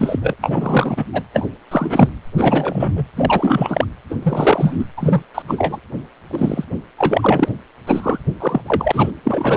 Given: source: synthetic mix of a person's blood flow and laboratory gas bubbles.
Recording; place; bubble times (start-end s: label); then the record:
Doppler ultrasound of blood flow; precordium
0.00-0.36 s: bubbles
0.41-1.05 s: bubbles
1.13-1.23 s: bubbles
1.33-1.48 s: bubbles
1.71-2.10 s: bubbles
2.38-3.06 s: bubbles
3.16-3.85 s: bubbles
4.10-4.15 s: bubbles
4.23-4.84 s: bubbles
4.97-5.23 s: bubbles
5.34-5.42 s: bubbles
5.48-5.79 s: bubbles
6.32-6.65 s: bubbles
6.98-7.49 s: bubbles
7.87-8.20 s: bubbles
8.40-8.61 s: bubbles
8.66-9.10 s: bubbles
9.23-9.57 s: bubbles
From the record:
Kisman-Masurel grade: 343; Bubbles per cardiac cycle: rolling drumbeat, 9 or more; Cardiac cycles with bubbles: 100%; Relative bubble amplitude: loud (0.450 to 0.775); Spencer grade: 3 (all of the cardiac periods contain showers or single bubble signals, but not dominating or overriding the cardiac motion signals); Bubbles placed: anywhere in the cardiac cycle